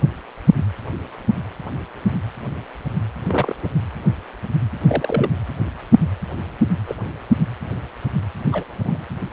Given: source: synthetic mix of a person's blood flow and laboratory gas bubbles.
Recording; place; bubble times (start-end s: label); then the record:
Doppler ultrasound of blood flow; precordium
3.27-3.55 s: bubbles
3.62-3.70 s: bubbles
4.88-5.29 s: bubbles
6.88-6.96 s: bubbles
8.52-8.64 s: bubbles
8.72-8.97 s: bubbles
From the record:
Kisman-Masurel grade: 122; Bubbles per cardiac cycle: 1 to 2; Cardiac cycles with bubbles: 10 to 50%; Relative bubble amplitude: moderate (0.250 to 0.450); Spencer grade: 2 (many but less than half of the cardiac periods contain bubble signals, singularly or in groups); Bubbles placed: anywhere in the cardiac cycle